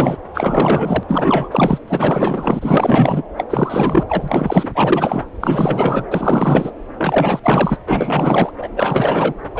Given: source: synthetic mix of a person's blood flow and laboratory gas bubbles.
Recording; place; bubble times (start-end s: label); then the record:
Doppler ultrasound of blood flow; subclavian vein
0.00-0.17 s: bubbles
0.34-1.03 s: bubbles
1.08-1.78 s: bubbles
1.87-3.23 s: bubbles
3.37-3.45 s: bubbles
3.50-4.69 s: bubbles
4.75-5.25 s: bubbles
5.40-6.04 s: bubbles
6.11-6.71 s: bubbles
6.98-7.40 s: bubbles
7.43-7.77 s: bubbles
7.88-8.52 s: bubbles
8.57-8.69 s: bubbles
8.76-9.34 s: bubbles
9.54-9.60 s: bubbles
From the record:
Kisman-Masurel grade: 444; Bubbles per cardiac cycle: continuous sound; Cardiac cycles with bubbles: 100%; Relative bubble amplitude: maximal (0.775 to 0.999); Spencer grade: 4 (maximum detectable bubble signal sounding continuously throughout systole and diastole of every cardiac period, and overriding the amplitude of the normal cardiac signals); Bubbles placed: anywhere in the cardiac cycle